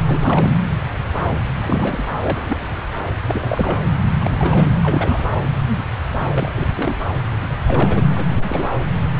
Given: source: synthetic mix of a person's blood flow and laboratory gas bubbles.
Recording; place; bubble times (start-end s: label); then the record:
Doppler ultrasound of blood flow; subclavian vein
0.08-0.49 s: bubbles
1.60-2.11 s: bubbles
2.19-2.65 s: bubbles
3.28-3.80 s: bubbles
4.20-5.25 s: bubbles
6.32-6.50 s: bubbles
6.54-6.69 s: bubbles
6.75-6.96 s: bubbles
7.67-8.02 s: bubbles
8.15-8.26 s: bubbles
8.29-8.66 s: bubbles
From the record:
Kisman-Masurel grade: 232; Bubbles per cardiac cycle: several, 3 to 8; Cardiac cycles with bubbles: 50 to 99%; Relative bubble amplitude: moderate (0.250 to 0.450); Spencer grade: 3 (all of the cardiac periods contain showers or single bubble signals, but not dominating or overriding the cardiac motion signals); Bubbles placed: anywhere in the cardiac cycle